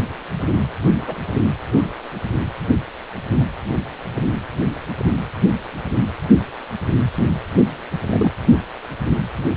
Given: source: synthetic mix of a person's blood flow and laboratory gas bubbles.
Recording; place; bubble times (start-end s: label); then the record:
Doppler ultrasound of blood flow; precordium
1.02-1.17 s: bubbles
1.71-1.87 s: bubbles
8.09-8.29 s: bubbles
From the record:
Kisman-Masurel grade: 122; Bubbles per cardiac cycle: 1 to 2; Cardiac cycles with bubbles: 10 to 50%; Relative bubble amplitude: moderate (0.250 to 0.450); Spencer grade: 2 (many but less than half of the cardiac periods contain bubble signals, singularly or in groups); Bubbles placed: anywhere in the cardiac cycle